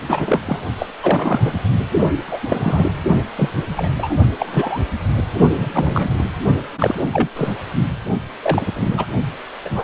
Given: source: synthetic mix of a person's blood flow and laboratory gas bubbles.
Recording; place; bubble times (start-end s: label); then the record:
Doppler ultrasound of blood flow; precordium
0.08-0.41 s: bubbles
0.46-0.61 s: bubbles
0.78-0.86 s: bubbles
1.02-1.68 s: bubbles
2.27-2.39 s: bubbles
2.43-2.93 s: bubbles
3.36-3.49 s: bubbles
3.77-3.89 s: bubbles
3.97-4.15 s: bubbles
4.38-4.81 s: bubbles
5.57-5.70 s: bubbles
5.74-6.24 s: bubbles
6.79-7.00 s: bubbles
7.12-7.28 s: bubbles
7.36-7.53 s: bubbles
8.42-9.05 s: bubbles
9.64-9.69 s: bubbles
9.74-9.84 s: bubbles
From the record:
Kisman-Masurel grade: 243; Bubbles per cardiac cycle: several, 3 to 8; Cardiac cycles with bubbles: 100%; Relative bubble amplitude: loud (0.450 to 0.775); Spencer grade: 3 (all of the cardiac periods contain showers or single bubble signals, but not dominating or overriding the cardiac motion signals); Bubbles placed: only in the low amplitude regions of the cardiac cycle